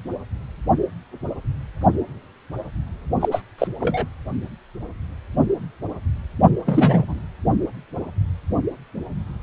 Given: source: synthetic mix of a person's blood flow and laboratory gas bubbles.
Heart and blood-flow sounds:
Doppler ultrasound of blood flow; precordium
3.20-3.29 s: bubbles
3.31-3.42 s: bubbles
3.58-3.67 s: bubbles
3.80-4.05 s: bubbles
6.65-7.21 s: bubbles
From the record:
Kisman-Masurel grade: 223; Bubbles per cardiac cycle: several, 3 to 8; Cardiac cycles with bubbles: 10 to 50%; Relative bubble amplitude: loud (0.450 to 0.775); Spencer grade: 2 (many but less than half of the cardiac periods contain bubble signals, singularly or in groups); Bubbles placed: only in the low amplitude regions of the cardiac cycle

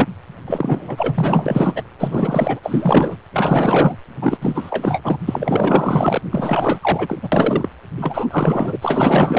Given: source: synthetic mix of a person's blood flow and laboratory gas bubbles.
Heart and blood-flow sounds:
Doppler ultrasound of blood flow; precordium
0.00-0.06 s: bubbles
0.46-1.83 s: bubbles
1.98-2.60 s: bubbles
2.62-3.16 s: bubbles
3.33-3.97 s: bubbles
4.21-4.38 s: bubbles
4.41-5.19 s: bubbles
5.28-6.21 s: bubbles
6.31-7.18 s: bubbles
7.22-7.29 s: bubbles
7.32-7.69 s: bubbles
7.96-8.78 s: bubbles
8.81-9.39 s: bubbles
From the record:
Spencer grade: 4 (maximum detectable bubble signal sounding continuously throughout systole and diastole of every cardiac period, and overriding the amplitude of the normal cardiac signals); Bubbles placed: anywhere in the cardiac cycle

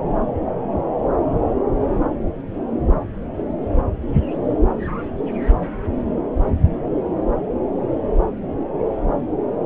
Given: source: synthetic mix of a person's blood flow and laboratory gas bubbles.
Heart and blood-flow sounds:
Doppler ultrasound of blood flow; subclavian vein
no bubbles
From the record:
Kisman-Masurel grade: 000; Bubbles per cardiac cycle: 0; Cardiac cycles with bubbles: 0%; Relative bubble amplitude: no bubbles discernible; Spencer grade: 0 (complete lack of bubble signals)

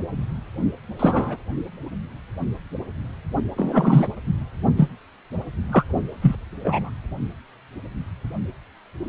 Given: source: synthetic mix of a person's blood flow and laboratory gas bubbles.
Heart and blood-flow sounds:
Doppler ultrasound of blood flow; precordium
0.99-1.36 s: bubbles
3.56-4.07 s: bubbles
4.76-4.89 s: bubbles
5.72-5.84 s: bubbles
6.21-6.35 s: bubbles
6.64-6.90 s: bubbles
From the record:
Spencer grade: 2 (many but less than half of the cardiac periods contain bubble signals, singularly or in groups); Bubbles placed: only in the low amplitude regions of the cardiac cycle

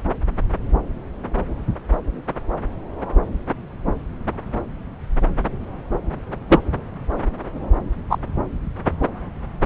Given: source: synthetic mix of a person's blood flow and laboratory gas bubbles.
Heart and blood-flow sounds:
Doppler ultrasound of blood flow; subclavian vein
6.48-6.60 s: bubbles
8.09-8.17 s: bubbles
From the record:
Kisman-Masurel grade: 123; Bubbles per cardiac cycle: 1 to 2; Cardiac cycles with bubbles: 10 to 50%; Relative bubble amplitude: loud (0.450 to 0.775); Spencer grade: 2 (many but less than half of the cardiac periods contain bubble signals, singularly or in groups); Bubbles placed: anywhere in the cardiac cycle

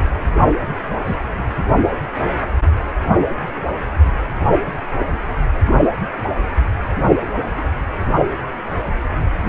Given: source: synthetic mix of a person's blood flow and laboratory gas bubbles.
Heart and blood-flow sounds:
Doppler ultrasound of blood flow; precordium
0.89-0.96 s: bubbles
1.06-1.15 s: bubbles
From the record:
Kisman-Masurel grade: 122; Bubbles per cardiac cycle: 1 to 2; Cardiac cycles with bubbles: 10 to 50%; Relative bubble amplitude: moderate (0.250 to 0.450); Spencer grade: 2 (many but less than half of the cardiac periods contain bubble signals, singularly or in groups); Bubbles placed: anywhere in the cardiac cycle

